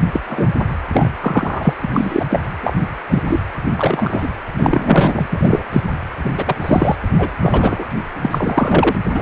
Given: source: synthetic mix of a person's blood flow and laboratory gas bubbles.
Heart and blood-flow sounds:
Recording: Doppler ultrasound of blood flow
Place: precordium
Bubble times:
0.12-0.22 s: bubbles
0.28-0.48 s: bubbles
0.93-1.09 s: bubbles
1.20-1.73 s: bubbles
1.82-1.89 s: bubbles
1.93-2.26 s: bubbles
2.30-2.40 s: bubbles
2.62-2.74 s: bubbles
3.09-3.23 s: bubbles
3.28-3.41 s: bubbles
3.76-4.29 s: bubbles
4.57-5.27 s: bubbles
5.30-5.63 s: bubbles
5.71-5.83 s: bubbles
6.24-6.56 s: bubbles
6.62-6.96 s: bubbles
7.18-7.29 s: bubbles
7.41-7.86 s: bubbles
8.17-8.96 s: bubbles
9.13-9.21 s: bubbles
From the record:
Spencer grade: 3 (all of the cardiac periods contain showers or single bubble signals, but not dominating or overriding the cardiac motion signals)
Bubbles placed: anywhere in the cardiac cycle

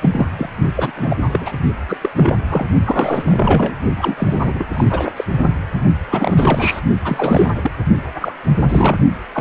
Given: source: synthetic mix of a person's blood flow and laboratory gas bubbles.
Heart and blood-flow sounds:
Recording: Doppler ultrasound of blood flow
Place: precordium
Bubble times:
0.01-0.26 s: bubbles
0.38-0.49 s: bubbles
0.74-1.16 s: bubbles
1.24-1.52 s: bubbles
1.88-1.97 s: bubbles
2.01-2.10 s: bubbles
2.16-2.35 s: bubbles
2.49-2.66 s: bubbles
2.83-3.75 s: bubbles
3.98-4.14 s: bubbles
4.17-4.65 s: bubbles
4.73-5.12 s: bubbles
5.16-5.25 s: bubbles
6.10-6.81 s: bubbles
7.04-7.71 s: bubbles
8.21-8.34 s: bubbles
8.59-8.98 s: bubbles
9.33-9.41 s: bubbles
From the record:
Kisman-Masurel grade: 342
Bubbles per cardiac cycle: rolling drumbeat, 9 or more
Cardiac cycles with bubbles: 100%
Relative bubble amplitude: moderate (0.250 to 0.450)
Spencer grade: 3 (all of the cardiac periods contain showers or single bubble signals, but not dominating or overriding the cardiac motion signals)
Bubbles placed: only in the low amplitude regions of the cardiac cycle

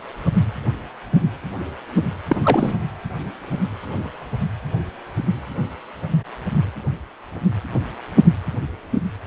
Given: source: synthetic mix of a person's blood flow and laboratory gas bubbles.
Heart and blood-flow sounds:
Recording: Doppler ultrasound of blood flow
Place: precordium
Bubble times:
2.28-2.75 s: bubbles
From the record:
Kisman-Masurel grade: 212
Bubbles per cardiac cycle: several, 3 to 8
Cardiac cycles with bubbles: 1 to 10%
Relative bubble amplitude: moderate (0.250 to 0.450)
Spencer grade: 1 (occasional bubble signal discernible with the cardiac motion signal, with majority of cardiac periods free of bubbles)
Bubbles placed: anywhere in the cardiac cycle

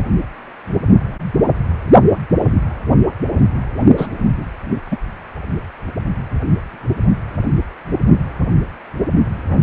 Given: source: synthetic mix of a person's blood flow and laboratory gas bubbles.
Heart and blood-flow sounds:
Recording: Doppler ultrasound of blood flow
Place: precordium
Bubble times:
3.97-4.07 s: bubbles
4.91-4.96 s: bubbles
From the record:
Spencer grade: 1 (occasional bubble signal discernible with the cardiac motion signal, with majority of cardiac periods free of bubbles)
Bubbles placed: only in the low amplitude regions of the cardiac cycle

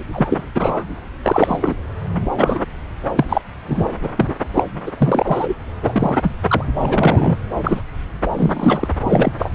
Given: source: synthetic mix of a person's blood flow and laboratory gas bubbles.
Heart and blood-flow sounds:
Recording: Doppler ultrasound of blood flow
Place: subclavian vein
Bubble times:
0.11-0.50 s: bubbles
0.54-0.85 s: bubbles
1.23-1.76 s: bubbles
2.37-2.65 s: bubbles
3.18-3.25 s: bubbles
3.29-3.42 s: bubbles
3.67-3.86 s: bubbles
4.02-4.09 s: bubbles
4.15-4.34 s: bubbles
4.54-4.64 s: bubbles
4.86-4.92 s: bubbles
4.97-5.54 s: bubbles
5.82-6.35 s: bubbles
6.49-6.64 s: bubbles
6.75-7.38 s: bubbles
7.63-7.81 s: bubbles
8.37-8.88 s: bubbles
9.04-9.32 s: bubbles
9.38-9.52 s: bubbles
From the record:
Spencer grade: 3 (all of the cardiac periods contain showers or single bubble signals, but not dominating or overriding the cardiac motion signals)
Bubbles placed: anywhere in the cardiac cycle

